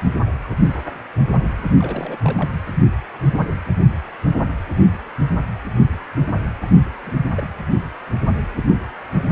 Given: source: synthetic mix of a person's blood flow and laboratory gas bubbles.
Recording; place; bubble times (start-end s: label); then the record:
Doppler ultrasound of blood flow; precordium
1.77-2.17 s: bubbles
2.23-2.50 s: bubbles
6.62-6.66 s: bubbles
7.03-7.14 s: bubbles
7.30-7.52 s: bubbles
From the record:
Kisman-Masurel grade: 221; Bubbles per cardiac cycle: several, 3 to 8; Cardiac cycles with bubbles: 10 to 50%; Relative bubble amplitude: barely perceptible (0.100 to 0.250); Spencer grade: 2 (many but less than half of the cardiac periods contain bubble signals, singularly or in groups); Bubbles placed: anywhere in the cardiac cycle